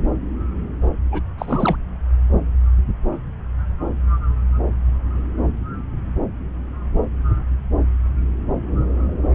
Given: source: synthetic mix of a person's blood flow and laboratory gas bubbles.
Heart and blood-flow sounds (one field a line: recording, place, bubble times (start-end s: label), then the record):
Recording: Doppler ultrasound of blood flow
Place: subclavian vein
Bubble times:
1.11-1.21 s: bubbles
1.38-1.76 s: bubbles
From the record:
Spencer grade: 1 (occasional bubble signal discernible with the cardiac motion signal, with majority of cardiac periods free of bubbles)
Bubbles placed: anywhere in the cardiac cycle